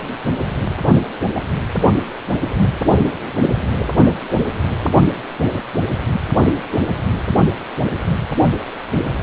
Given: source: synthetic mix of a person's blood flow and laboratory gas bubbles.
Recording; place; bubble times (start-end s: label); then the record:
Doppler ultrasound of blood flow; precordium
0.10-0.18 s: bubbles
0.81-0.97 s: bubbles
1.34-1.42 s: bubbles
From the record:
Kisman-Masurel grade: 211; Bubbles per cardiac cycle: several, 3 to 8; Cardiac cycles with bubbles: 1 to 10%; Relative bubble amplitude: barely perceptible (0.100 to 0.250); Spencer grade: 1 (occasional bubble signal discernible with the cardiac motion signal, with majority of cardiac periods free of bubbles); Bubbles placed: only in the low amplitude regions of the cardiac cycle